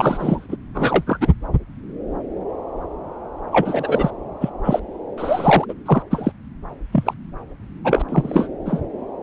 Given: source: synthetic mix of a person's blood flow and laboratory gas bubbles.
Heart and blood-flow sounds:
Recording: Doppler ultrasound of blood flow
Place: subclavian vein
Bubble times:
0.00-0.57 s: bubbles
0.74-1.03 s: bubbles
1.06-1.18 s: bubbles
1.21-1.28 s: bubbles
3.52-4.10 s: bubbles
4.40-4.49 s: bubbles
4.63-4.79 s: bubbles
5.17-5.65 s: bubbles
5.68-5.73 s: bubbles
5.85-6.02 s: bubbles
6.10-6.32 s: bubbles
6.92-7.14 s: bubbles
7.84-8.02 s: bubbles
8.08-8.47 s: bubbles
8.65-8.81 s: bubbles
From the record:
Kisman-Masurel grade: 233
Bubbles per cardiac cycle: several, 3 to 8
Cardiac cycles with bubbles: 50 to 99%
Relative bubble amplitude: loud (0.450 to 0.775)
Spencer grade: 3 (all of the cardiac periods contain showers or single bubble signals, but not dominating or overriding the cardiac motion signals)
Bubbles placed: anywhere in the cardiac cycle

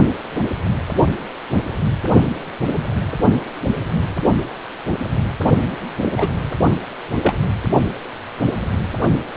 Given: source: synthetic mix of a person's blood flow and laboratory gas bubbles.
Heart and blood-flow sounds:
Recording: Doppler ultrasound of blood flow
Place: precordium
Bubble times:
6.02-6.09 s: bubbles
6.17-6.29 s: bubbles
7.22-7.35 s: bubbles
From the record:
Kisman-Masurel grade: 123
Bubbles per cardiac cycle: 1 to 2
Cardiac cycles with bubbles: 10 to 50%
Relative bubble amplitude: loud (0.450 to 0.775)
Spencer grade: 2 (many but less than half of the cardiac periods contain bubble signals, singularly or in groups)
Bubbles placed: only in the low amplitude regions of the cardiac cycle

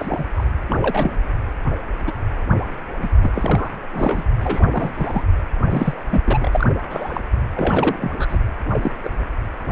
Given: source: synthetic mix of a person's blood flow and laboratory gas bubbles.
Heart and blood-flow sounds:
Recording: Doppler ultrasound of blood flow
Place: precordium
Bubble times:
0.00-0.25 s: bubbles
0.35-0.45 s: bubbles
0.70-1.29 s: bubbles
2.06-2.12 s: bubbles
3.02-3.08 s: bubbles
3.22-3.31 s: bubbles
3.35-3.69 s: bubbles
3.92-4.24 s: bubbles
4.41-5.24 s: bubbles
5.69-6.03 s: bubbles
6.09-6.21 s: bubbles
6.26-6.67 s: bubbles
6.89-7.21 s: bubbles
7.55-8.09 s: bubbles
8.17-8.39 s: bubbles
8.68-8.91 s: bubbles
9.03-9.09 s: bubbles
From the record:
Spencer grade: 3 (all of the cardiac periods contain showers or single bubble signals, but not dominating or overriding the cardiac motion signals)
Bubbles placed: anywhere in the cardiac cycle

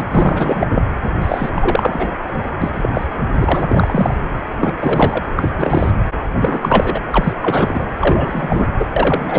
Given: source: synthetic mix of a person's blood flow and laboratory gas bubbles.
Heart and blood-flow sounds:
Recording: Doppler ultrasound of blood flow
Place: precordium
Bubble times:
0.00-0.03 s: bubbles
0.11-0.83 s: bubbles
1.22-1.50 s: bubbles
1.55-2.09 s: bubbles
2.33-2.44 s: bubbles
2.62-2.90 s: bubbles
2.94-3.06 s: bubbles
3.41-4.14 s: bubbles
4.59-4.75 s: bubbles
4.80-5.23 s: bubbles
5.36-5.55 s: bubbles
5.57-5.92 s: bubbles
6.35-7.00 s: bubbles
7.10-7.33 s: bubbles
7.42-7.84 s: bubbles
8.00-8.70 s: bubbles
8.79-8.85 s: bubbles
8.96-9.39 s: bubbles
From the record:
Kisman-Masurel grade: 343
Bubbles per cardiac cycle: rolling drumbeat, 9 or more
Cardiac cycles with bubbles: 100%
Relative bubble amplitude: loud (0.450 to 0.775)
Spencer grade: 3 (all of the cardiac periods contain showers or single bubble signals, but not dominating or overriding the cardiac motion signals)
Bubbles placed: anywhere in the cardiac cycle

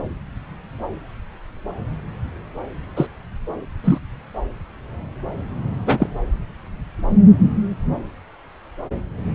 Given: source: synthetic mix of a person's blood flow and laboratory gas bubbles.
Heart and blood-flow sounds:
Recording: Doppler ultrasound of blood flow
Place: subclavian vein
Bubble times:
2.96-3.06 s: bubbles
3.84-3.98 s: bubbles
5.86-6.07 s: bubbles
From the record:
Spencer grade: 2 (many but less than half of the cardiac periods contain bubble signals, singularly or in groups)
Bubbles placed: anywhere in the cardiac cycle

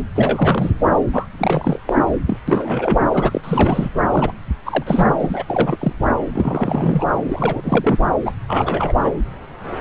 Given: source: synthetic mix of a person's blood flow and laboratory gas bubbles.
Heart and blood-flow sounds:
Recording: Doppler ultrasound of blood flow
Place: subclavian vein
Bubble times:
0.15-0.71 s: bubbles
1.13-1.28 s: bubbles
1.38-1.80 s: bubbles
1.85-1.96 s: bubbles
2.27-2.39 s: bubbles
2.48-3.04 s: bubbles
3.12-3.41 s: bubbles
3.44-3.89 s: bubbles
4.10-4.32 s: bubbles
4.66-5.15 s: bubbles
5.20-5.77 s: bubbles
5.79-5.92 s: bubbles
6.33-7.05 s: bubbles
7.28-7.60 s: bubbles
7.63-7.97 s: bubbles
8.26-8.33 s: bubbles
8.48-9.18 s: bubbles
9.78-9.81 s: bubbles
From the record:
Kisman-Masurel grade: 342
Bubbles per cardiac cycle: rolling drumbeat, 9 or more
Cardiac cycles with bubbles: 100%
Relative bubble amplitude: moderate (0.250 to 0.450)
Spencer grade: 3 (all of the cardiac periods contain showers or single bubble signals, but not dominating or overriding the cardiac motion signals)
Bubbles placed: anywhere in the cardiac cycle

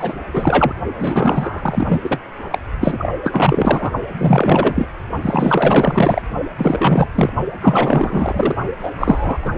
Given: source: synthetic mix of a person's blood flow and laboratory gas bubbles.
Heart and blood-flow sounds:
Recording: Doppler ultrasound of blood flow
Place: precordium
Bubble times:
0.00-0.22 s: bubbles
0.34-0.74 s: bubbles
0.98-2.19 s: bubbles
2.51-2.58 s: bubbles
2.80-3.13 s: bubbles
3.23-3.91 s: bubbles
4.18-4.90 s: bubbles
5.22-6.22 s: bubbles
6.58-7.08 s: bubbles
7.15-7.30 s: bubbles
7.61-8.56 s: bubbles
8.79-8.91 s: bubbles
8.98-9.38 s: bubbles
9.42-9.51 s: bubbles
From the record:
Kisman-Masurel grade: 444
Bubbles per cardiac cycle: continuous sound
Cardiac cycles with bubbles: 100%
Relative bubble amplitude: maximal (0.775 to 0.999)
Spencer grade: 4 (maximum detectable bubble signal sounding continuously throughout systole and diastole of every cardiac period, and overriding the amplitude of the normal cardiac signals)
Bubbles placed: only in the low amplitude regions of the cardiac cycle

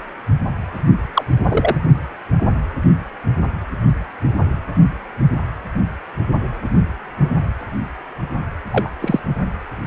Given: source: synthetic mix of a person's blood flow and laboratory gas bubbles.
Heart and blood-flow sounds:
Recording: Doppler ultrasound of blood flow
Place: precordium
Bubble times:
1.14-1.24 s: bubbles
1.48-1.76 s: bubbles
8.71-8.90 s: bubbles
9.01-9.20 s: bubbles
From the record:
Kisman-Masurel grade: 123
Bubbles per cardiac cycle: 1 to 2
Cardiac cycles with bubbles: 10 to 50%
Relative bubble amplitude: loud (0.450 to 0.775)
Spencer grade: 2 (many but less than half of the cardiac periods contain bubble signals, singularly or in groups)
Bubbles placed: only in the low amplitude regions of the cardiac cycle

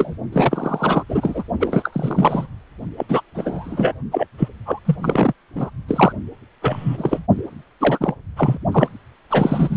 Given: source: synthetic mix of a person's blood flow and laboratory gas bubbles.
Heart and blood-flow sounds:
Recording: Doppler ultrasound of blood flow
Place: precordium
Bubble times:
0.00-0.17 s: bubbles
0.33-1.04 s: bubbles
1.08-1.44 s: bubbles
1.60-2.47 s: bubbles
2.97-3.06 s: bubbles
3.08-3.21 s: bubbles
3.35-3.94 s: bubbles
4.12-4.27 s: bubbles
4.38-4.49 s: bubbles
4.66-4.79 s: bubbles
4.85-4.96 s: bubbles
5.02-5.33 s: bubbles
5.55-5.71 s: bubbles
5.88-6.12 s: bubbles
6.62-7.20 s: bubbles
7.80-8.14 s: bubbles
8.36-8.58 s: bubbles
8.71-8.88 s: bubbles
9.30-9.77 s: bubbles
From the record:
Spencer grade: 3 (all of the cardiac periods contain showers or single bubble signals, but not dominating or overriding the cardiac motion signals)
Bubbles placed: only in the low amplitude regions of the cardiac cycle

